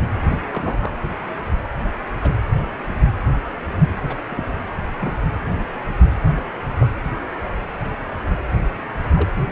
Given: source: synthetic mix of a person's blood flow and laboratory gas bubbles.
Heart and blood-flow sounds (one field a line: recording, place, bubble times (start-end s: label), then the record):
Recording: Doppler ultrasound of blood flow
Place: precordium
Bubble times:
0.51-0.96 s: bubbles
2.21-2.36 s: bubbles
4.03-4.16 s: bubbles
4.29-4.45 s: bubbles
5.00-5.17 s: bubbles
6.35-6.42 s: bubbles
6.68-6.91 s: bubbles
9.15-9.30 s: bubbles
From the record:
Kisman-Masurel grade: 121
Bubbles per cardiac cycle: 1 to 2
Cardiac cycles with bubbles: 10 to 50%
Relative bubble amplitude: barely perceptible (0.100 to 0.250)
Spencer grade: 2 (many but less than half of the cardiac periods contain bubble signals, singularly or in groups)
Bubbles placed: anywhere in the cardiac cycle